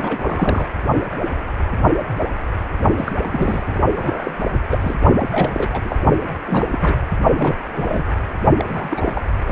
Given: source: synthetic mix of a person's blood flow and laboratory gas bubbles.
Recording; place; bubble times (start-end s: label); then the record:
Doppler ultrasound of blood flow; precordium
0.00-0.67 s: bubbles
2.97-3.12 s: bubbles
3.22-3.64 s: bubbles
3.67-3.79 s: bubbles
3.96-4.31 s: bubbles
4.70-4.95 s: bubbles
5.20-5.29 s: bubbles
5.32-5.69 s: bubbles
5.72-5.96 s: bubbles
6.28-6.33 s: bubbles
6.48-6.95 s: bubbles
7.35-7.55 s: bubbles
7.75-8.04 s: bubbles
8.58-9.22 s: bubbles
9.47-9.52 s: bubbles
From the record:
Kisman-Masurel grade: 332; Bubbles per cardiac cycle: rolling drumbeat, 9 or more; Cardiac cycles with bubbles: 50 to 99%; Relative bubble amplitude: moderate (0.250 to 0.450); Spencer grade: 3 (all of the cardiac periods contain showers or single bubble signals, but not dominating or overriding the cardiac motion signals); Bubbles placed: only in the low amplitude regions of the cardiac cycle